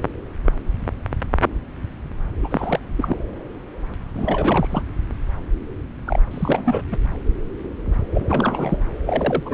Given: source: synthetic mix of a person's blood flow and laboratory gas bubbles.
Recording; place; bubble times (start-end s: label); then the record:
Doppler ultrasound of blood flow; subclavian vein
2.42-2.79 s: bubbles
2.97-3.17 s: bubbles
4.15-4.82 s: bubbles
6.07-6.21 s: bubbles
6.31-6.83 s: bubbles
6.91-6.98 s: bubbles
8.14-8.76 s: bubbles
9.06-9.54 s: bubbles
From the record:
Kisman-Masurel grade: 232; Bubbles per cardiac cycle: several, 3 to 8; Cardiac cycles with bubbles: 50 to 99%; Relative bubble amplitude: moderate (0.250 to 0.450); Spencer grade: 3 (all of the cardiac periods contain showers or single bubble signals, but not dominating or overriding the cardiac motion signals); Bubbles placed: anywhere in the cardiac cycle